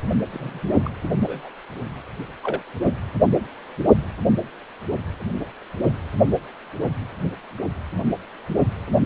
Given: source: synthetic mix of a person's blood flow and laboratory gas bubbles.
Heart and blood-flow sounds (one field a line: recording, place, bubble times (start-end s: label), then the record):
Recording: Doppler ultrasound of blood flow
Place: precordium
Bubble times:
0.32-0.60 s: bubbles
0.83-0.92 s: bubbles
1.23-1.49 s: bubbles
2.43-2.62 s: bubbles
From the record:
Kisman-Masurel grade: 121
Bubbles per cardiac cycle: 1 to 2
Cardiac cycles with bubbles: 10 to 50%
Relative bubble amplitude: barely perceptible (0.100 to 0.250)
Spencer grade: 2 (many but less than half of the cardiac periods contain bubble signals, singularly or in groups)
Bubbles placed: only in the low amplitude regions of the cardiac cycle